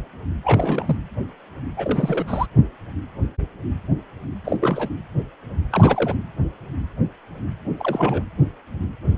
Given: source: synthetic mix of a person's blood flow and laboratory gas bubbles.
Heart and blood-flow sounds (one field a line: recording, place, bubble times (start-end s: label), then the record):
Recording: Doppler ultrasound of blood flow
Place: precordium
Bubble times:
0.44-0.97 s: bubbles
1.77-2.25 s: bubbles
2.27-2.46 s: bubbles
4.44-4.57 s: bubbles
4.60-4.88 s: bubbles
5.71-6.16 s: bubbles
7.77-8.23 s: bubbles
9.03-9.18 s: bubbles
From the record:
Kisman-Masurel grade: 222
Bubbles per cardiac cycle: several, 3 to 8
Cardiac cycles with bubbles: 10 to 50%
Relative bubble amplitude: moderate (0.250 to 0.450)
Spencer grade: 2 (many but less than half of the cardiac periods contain bubble signals, singularly or in groups)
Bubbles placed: anywhere in the cardiac cycle